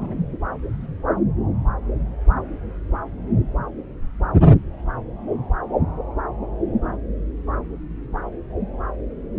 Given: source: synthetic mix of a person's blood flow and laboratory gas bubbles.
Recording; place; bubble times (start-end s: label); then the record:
Doppler ultrasound of blood flow; subclavian vein
0.00-0.14 s: bubbles
From the record:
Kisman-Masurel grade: 211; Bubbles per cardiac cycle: several, 3 to 8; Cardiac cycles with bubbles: 1 to 10%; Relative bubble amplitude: barely perceptible (0.100 to 0.250); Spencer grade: 1 (occasional bubble signal discernible with the cardiac motion signal, with majority of cardiac periods free of bubbles); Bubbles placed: anywhere in the cardiac cycle